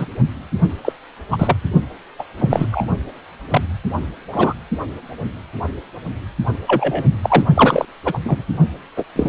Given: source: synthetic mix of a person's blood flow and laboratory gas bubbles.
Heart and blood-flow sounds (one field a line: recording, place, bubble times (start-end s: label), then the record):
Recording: Doppler ultrasound of blood flow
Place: precordium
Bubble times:
0.00-0.05 s: bubbles
0.84-0.93 s: bubbles
1.30-1.56 s: bubbles
2.19-2.24 s: bubbles
2.37-2.67 s: bubbles
2.71-2.85 s: bubbles
3.50-3.62 s: bubbles
4.32-4.54 s: bubbles
6.67-7.04 s: bubbles
7.22-7.43 s: bubbles
7.54-7.85 s: bubbles
8.05-8.18 s: bubbles
8.23-8.43 s: bubbles
8.97-9.04 s: bubbles
9.15-9.29 s: bubbles
From the record:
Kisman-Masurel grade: 233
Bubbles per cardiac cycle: several, 3 to 8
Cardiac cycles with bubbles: 50 to 99%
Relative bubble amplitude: loud (0.450 to 0.775)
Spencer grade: 3 (all of the cardiac periods contain showers or single bubble signals, but not dominating or overriding the cardiac motion signals)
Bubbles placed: only in the low amplitude regions of the cardiac cycle